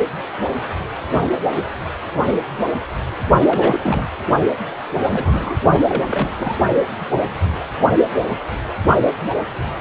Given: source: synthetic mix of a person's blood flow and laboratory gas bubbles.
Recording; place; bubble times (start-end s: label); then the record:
Doppler ultrasound of blood flow; precordium
3.46-4.09 s: bubbles
5.00-5.56 s: bubbles
5.87-6.29 s: bubbles
6.32-6.58 s: bubbles
From the record:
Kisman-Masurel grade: 222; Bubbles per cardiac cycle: several, 3 to 8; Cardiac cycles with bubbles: 10 to 50%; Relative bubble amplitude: moderate (0.250 to 0.450); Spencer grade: 2 (many but less than half of the cardiac periods contain bubble signals, singularly or in groups); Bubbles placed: only in the low amplitude regions of the cardiac cycle